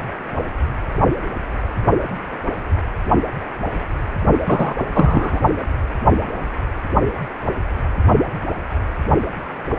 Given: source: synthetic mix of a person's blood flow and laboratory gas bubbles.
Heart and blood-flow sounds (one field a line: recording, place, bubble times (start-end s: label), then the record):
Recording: Doppler ultrasound of blood flow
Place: precordium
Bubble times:
4.46-4.74 s: bubbles
4.94-5.40 s: bubbles
From the record:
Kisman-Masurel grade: 213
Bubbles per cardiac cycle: several, 3 to 8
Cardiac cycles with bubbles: 1 to 10%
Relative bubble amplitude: loud (0.450 to 0.775)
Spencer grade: 1 (occasional bubble signal discernible with the cardiac motion signal, with majority of cardiac periods free of bubbles)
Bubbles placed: only in the low amplitude regions of the cardiac cycle